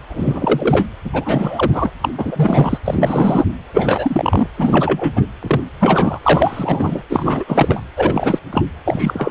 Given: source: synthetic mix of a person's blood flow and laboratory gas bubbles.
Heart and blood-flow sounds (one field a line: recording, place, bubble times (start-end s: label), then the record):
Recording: Doppler ultrasound of blood flow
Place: precordium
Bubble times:
0.09-0.88 s: bubbles
1.04-1.91 s: bubbles
2.01-2.09 s: bubbles
2.17-2.78 s: bubbles
2.85-3.45 s: bubbles
3.74-4.47 s: bubbles
4.58-5.22 s: bubbles
5.42-5.61 s: bubbles
5.79-6.19 s: bubbles
6.23-7.02 s: bubbles
7.09-7.44 s: bubbles
7.47-7.81 s: bubbles
7.95-8.39 s: bubbles
8.51-8.65 s: bubbles
8.85-9.31 s: bubbles
From the record:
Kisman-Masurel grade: 343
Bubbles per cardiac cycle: rolling drumbeat, 9 or more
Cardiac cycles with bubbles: 100%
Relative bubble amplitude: loud (0.450 to 0.775)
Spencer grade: 3 (all of the cardiac periods contain showers or single bubble signals, but not dominating or overriding the cardiac motion signals)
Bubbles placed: anywhere in the cardiac cycle